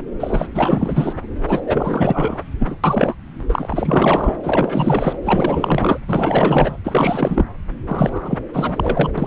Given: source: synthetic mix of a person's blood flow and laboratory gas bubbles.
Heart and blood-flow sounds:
Doppler ultrasound of blood flow; subclavian vein
0.20-0.46 s: bubbles
0.54-1.14 s: bubbles
1.48-1.60 s: bubbles
1.66-2.43 s: bubbles
2.59-2.75 s: bubbles
2.83-3.14 s: bubbles
3.49-4.35 s: bubbles
4.43-5.15 s: bubbles
5.25-5.98 s: bubbles
6.07-6.77 s: bubbles
6.84-7.45 s: bubbles
7.87-8.38 s: bubbles
8.53-9.10 s: bubbles
9.17-9.27 s: bubbles
From the record:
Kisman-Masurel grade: 444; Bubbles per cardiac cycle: continuous sound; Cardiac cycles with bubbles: 100%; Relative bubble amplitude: maximal (0.775 to 0.999); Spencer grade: 4 (maximum detectable bubble signal sounding continuously throughout systole and diastole of every cardiac period, and overriding the amplitude of the normal cardiac signals); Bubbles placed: anywhere in the cardiac cycle

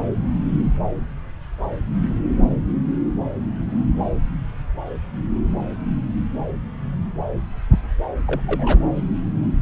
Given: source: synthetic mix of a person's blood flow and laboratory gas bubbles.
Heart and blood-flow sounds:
Doppler ultrasound of blood flow; subclavian vein
8.27-8.41 s: bubbles
8.46-8.79 s: bubbles
From the record:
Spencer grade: 1 (occasional bubble signal discernible with the cardiac motion signal, with majority of cardiac periods free of bubbles); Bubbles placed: anywhere in the cardiac cycle

